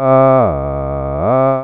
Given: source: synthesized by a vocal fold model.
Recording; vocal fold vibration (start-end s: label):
sustained vowel that changes in the middle
0.00-0.36 s: 132.5 Hz, open quotient 0.48
0.56-1.16 s: 69.0 Hz, open quotient 0.44
1.36-1.64 s: 132.5 Hz, open quotient 0.48